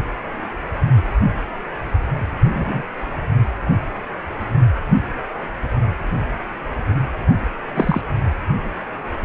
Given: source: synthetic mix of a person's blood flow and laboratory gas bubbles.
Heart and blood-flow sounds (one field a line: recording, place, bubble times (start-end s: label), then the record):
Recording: Doppler ultrasound of blood flow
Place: precordium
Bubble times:
2.51-2.83 s: bubbles
7.75-8.01 s: bubbles
From the record:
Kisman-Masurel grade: 123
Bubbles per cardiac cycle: 1 to 2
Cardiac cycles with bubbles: 10 to 50%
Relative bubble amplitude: loud (0.450 to 0.775)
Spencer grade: 2 (many but less than half of the cardiac periods contain bubble signals, singularly or in groups)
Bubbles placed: anywhere in the cardiac cycle